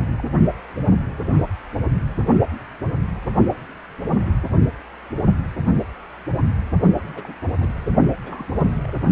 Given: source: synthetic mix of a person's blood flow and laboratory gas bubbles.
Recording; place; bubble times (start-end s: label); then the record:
Doppler ultrasound of blood flow; precordium
0.06-0.23 s: bubbles
7.02-7.33 s: bubbles
7.60-7.69 s: bubbles
8.23-8.45 s: bubbles
8.83-8.90 s: bubbles
From the record:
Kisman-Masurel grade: 221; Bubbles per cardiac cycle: several, 3 to 8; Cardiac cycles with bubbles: 10 to 50%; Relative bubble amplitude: barely perceptible (0.100 to 0.250); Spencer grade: 2 (many but less than half of the cardiac periods contain bubble signals, singularly or in groups); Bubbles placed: only in the low amplitude regions of the cardiac cycle